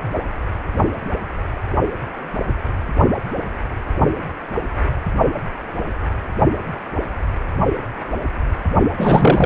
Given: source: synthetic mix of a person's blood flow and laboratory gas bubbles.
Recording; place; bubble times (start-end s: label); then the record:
Doppler ultrasound of blood flow; precordium
8.96-9.46 s: bubbles
From the record:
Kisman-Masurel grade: 213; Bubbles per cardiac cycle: several, 3 to 8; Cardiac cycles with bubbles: 1 to 10%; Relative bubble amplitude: loud (0.450 to 0.775); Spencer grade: 1 (occasional bubble signal discernible with the cardiac motion signal, with majority of cardiac periods free of bubbles); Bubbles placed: only in the low amplitude regions of the cardiac cycle